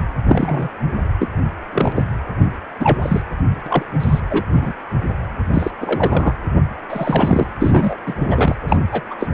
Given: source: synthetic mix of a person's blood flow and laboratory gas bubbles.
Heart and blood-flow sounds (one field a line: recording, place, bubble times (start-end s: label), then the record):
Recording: Doppler ultrasound of blood flow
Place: precordium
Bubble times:
0.27-0.69 s: bubbles
1.19-1.28 s: bubbles
1.73-1.93 s: bubbles
1.95-2.05 s: bubbles
2.79-3.22 s: bubbles
3.66-3.83 s: bubbles
4.00-4.20 s: bubbles
4.30-4.43 s: bubbles
4.50-4.73 s: bubbles
5.54-5.71 s: bubbles
5.81-6.34 s: bubbles
6.90-7.46 s: bubbles
7.61-7.96 s: bubbles
8.06-8.14 s: bubbles
8.21-8.55 s: bubbles
8.67-8.77 s: bubbles
8.91-9.01 s: bubbles
9.10-9.15 s: bubbles
9.19-9.34 s: bubbles
From the record:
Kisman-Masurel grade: 243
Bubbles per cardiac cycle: several, 3 to 8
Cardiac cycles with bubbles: 100%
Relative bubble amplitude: loud (0.450 to 0.775)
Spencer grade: 3 (all of the cardiac periods contain showers or single bubble signals, but not dominating or overriding the cardiac motion signals)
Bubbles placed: anywhere in the cardiac cycle